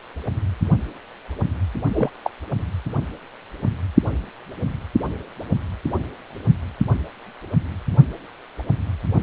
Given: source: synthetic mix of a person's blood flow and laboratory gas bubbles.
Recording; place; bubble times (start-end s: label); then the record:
Doppler ultrasound of blood flow; precordium
1.93-2.09 s: bubbles
2.24-2.30 s: bubbles
From the record:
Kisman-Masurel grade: 112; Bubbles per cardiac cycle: 1 to 2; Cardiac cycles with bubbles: 1 to 10%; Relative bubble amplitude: moderate (0.250 to 0.450); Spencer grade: 1 (occasional bubble signal discernible with the cardiac motion signal, with majority of cardiac periods free of bubbles); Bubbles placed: only in the low amplitude regions of the cardiac cycle